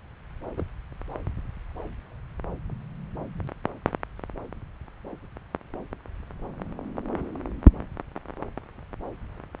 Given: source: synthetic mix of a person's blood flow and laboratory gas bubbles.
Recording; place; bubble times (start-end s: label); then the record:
Doppler ultrasound of blood flow; subclavian vein
0.57-0.64 s: bubbles
From the record:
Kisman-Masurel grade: 111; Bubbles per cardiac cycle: 1 to 2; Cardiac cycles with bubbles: 1 to 10%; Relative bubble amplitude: barely perceptible (0.100 to 0.250); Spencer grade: 1 (occasional bubble signal discernible with the cardiac motion signal, with majority of cardiac periods free of bubbles); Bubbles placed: anywhere in the cardiac cycle